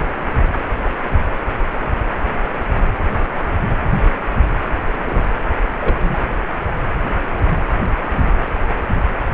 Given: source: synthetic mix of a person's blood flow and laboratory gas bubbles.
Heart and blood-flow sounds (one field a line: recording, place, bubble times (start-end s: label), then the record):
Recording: Doppler ultrasound of blood flow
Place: precordium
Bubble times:
4.94-5.23 s: bubbles
5.80-5.96 s: bubbles
6.00-6.17 s: bubbles
From the record:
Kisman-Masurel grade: 111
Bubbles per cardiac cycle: 1 to 2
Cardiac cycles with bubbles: 1 to 10%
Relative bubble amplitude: barely perceptible (0.100 to 0.250)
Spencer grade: 1 (occasional bubble signal discernible with the cardiac motion signal, with majority of cardiac periods free of bubbles)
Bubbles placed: anywhere in the cardiac cycle